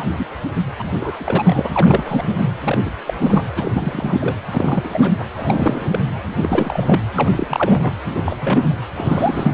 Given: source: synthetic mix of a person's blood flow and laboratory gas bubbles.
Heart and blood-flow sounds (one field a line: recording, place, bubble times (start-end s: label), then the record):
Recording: Doppler ultrasound of blood flow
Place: precordium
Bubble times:
0.00-0.05 s: bubbles
0.17-0.27 s: bubbles
0.78-0.83 s: bubbles
1.00-1.69 s: bubbles
1.72-2.35 s: bubbles
2.38-2.44 s: bubbles
2.63-2.78 s: bubbles
2.85-2.91 s: bubbles
3.06-3.14 s: bubbles
3.19-3.47 s: bubbles
3.55-4.13 s: bubbles
4.21-4.37 s: bubbles
4.51-5.12 s: bubbles
5.18-5.25 s: bubbles
5.35-6.00 s: bubbles
6.41-7.01 s: bubbles
7.15-7.92 s: bubbles
8.07-8.22 s: bubbles
8.25-8.37 s: bubbles
8.42-8.81 s: bubbles
8.97-9.54 s: bubbles
From the record:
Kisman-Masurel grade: 342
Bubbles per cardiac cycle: rolling drumbeat, 9 or more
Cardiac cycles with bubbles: 100%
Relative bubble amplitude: moderate (0.250 to 0.450)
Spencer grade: 3 (all of the cardiac periods contain showers or single bubble signals, but not dominating or overriding the cardiac motion signals)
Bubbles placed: anywhere in the cardiac cycle